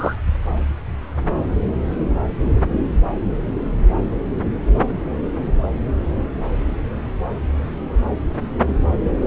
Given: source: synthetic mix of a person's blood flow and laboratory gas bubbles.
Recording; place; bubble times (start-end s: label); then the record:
Doppler ultrasound of blood flow; subclavian vein
0.00-0.15 s: bubbles
From the record:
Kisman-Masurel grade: 112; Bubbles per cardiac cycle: 1 to 2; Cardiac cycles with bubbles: 1 to 10%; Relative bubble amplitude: moderate (0.250 to 0.450); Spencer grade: 1 (occasional bubble signal discernible with the cardiac motion signal, with majority of cardiac periods free of bubbles); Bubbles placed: anywhere in the cardiac cycle